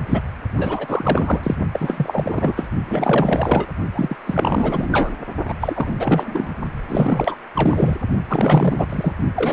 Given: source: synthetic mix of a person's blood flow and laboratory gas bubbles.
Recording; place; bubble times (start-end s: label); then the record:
Doppler ultrasound of blood flow; precordium
0.10-0.22 s: bubbles
0.57-1.55 s: bubbles
1.72-2.71 s: bubbles
2.88-3.67 s: bubbles
3.94-4.17 s: bubbles
4.25-5.16 s: bubbles
5.44-5.54 s: bubbles
5.60-5.96 s: bubbles
5.99-6.53 s: bubbles
6.88-7.36 s: bubbles
7.54-7.97 s: bubbles
8.29-8.87 s: bubbles
8.89-9.13 s: bubbles
9.35-9.53 s: bubbles
From the record:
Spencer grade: 4 (maximum detectable bubble signal sounding continuously throughout systole and diastole of every cardiac period, and overriding the amplitude of the normal cardiac signals); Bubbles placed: only in the low amplitude regions of the cardiac cycle